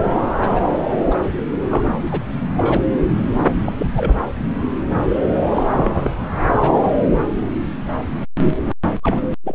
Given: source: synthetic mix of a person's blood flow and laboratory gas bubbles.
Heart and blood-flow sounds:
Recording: Doppler ultrasound of blood flow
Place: subclavian vein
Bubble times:
0.40-0.51 s: bubbles
0.55-0.80 s: bubbles
1.10-1.15 s: bubbles
1.69-1.86 s: bubbles
2.01-2.22 s: bubbles
2.57-2.82 s: bubbles
3.44-3.51 s: bubbles
3.66-3.72 s: bubbles
3.78-4.15 s: bubbles
5.54-5.63 s: bubbles
5.74-6.11 s: bubbles
6.61-6.71 s: bubbles
6.75-6.90 s: bubbles
9.03-9.36 s: bubbles
9.44-9.55 s: bubbles
From the record:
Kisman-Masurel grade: 232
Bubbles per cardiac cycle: several, 3 to 8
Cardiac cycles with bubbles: 50 to 99%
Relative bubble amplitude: moderate (0.250 to 0.450)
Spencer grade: 3 (all of the cardiac periods contain showers or single bubble signals, but not dominating or overriding the cardiac motion signals)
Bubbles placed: anywhere in the cardiac cycle

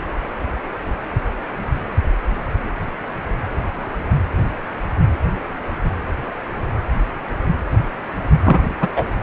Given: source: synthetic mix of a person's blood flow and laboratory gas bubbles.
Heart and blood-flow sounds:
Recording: Doppler ultrasound of blood flow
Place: precordium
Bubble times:
8.44-8.59 s: bubbles
8.80-8.88 s: bubbles
8.96-9.04 s: bubbles
From the record:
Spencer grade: 1 (occasional bubble signal discernible with the cardiac motion signal, with majority of cardiac periods free of bubbles)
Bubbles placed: anywhere in the cardiac cycle

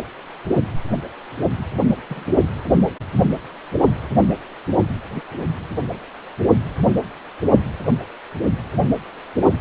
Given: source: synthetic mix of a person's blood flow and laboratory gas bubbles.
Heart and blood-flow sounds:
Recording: Doppler ultrasound of blood flow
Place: precordium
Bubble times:
2.08-2.25 s: bubbles
From the record:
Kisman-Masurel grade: 111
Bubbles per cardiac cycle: 1 to 2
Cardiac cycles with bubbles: 1 to 10%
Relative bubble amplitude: barely perceptible (0.100 to 0.250)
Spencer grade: 1 (occasional bubble signal discernible with the cardiac motion signal, with majority of cardiac periods free of bubbles)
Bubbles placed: anywhere in the cardiac cycle

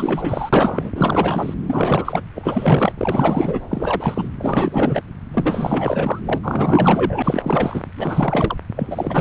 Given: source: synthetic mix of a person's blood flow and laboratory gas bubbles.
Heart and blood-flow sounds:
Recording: Doppler ultrasound of blood flow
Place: subclavian vein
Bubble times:
0.00-0.49 s: bubbles
0.53-0.90 s: bubbles
0.95-1.54 s: bubbles
1.67-2.25 s: bubbles
2.35-2.93 s: bubbles
2.98-3.60 s: bubbles
3.69-4.29 s: bubbles
4.38-5.02 s: bubbles
5.33-6.20 s: bubbles
6.26-6.38 s: bubbles
6.43-7.83 s: bubbles
7.97-8.57 s: bubbles
8.76-9.21 s: bubbles
From the record:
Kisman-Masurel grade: 444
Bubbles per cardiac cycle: continuous sound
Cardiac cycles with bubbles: 100%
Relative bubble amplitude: maximal (0.775 to 0.999)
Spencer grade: 4 (maximum detectable bubble signal sounding continuously throughout systole and diastole of every cardiac period, and overriding the amplitude of the normal cardiac signals)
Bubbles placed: anywhere in the cardiac cycle

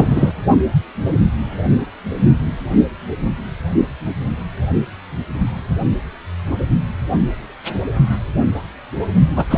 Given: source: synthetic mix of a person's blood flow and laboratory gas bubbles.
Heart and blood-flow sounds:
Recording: Doppler ultrasound of blood flow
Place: precordium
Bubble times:
0.00-0.32 s: bubbles
9.36-9.45 s: bubbles
9.50-9.57 s: bubbles
From the record:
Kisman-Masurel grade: 223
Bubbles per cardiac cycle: several, 3 to 8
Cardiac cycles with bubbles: 10 to 50%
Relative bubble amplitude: loud (0.450 to 0.775)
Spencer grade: 2 (many but less than half of the cardiac periods contain bubble signals, singularly or in groups)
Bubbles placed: only in the low amplitude regions of the cardiac cycle

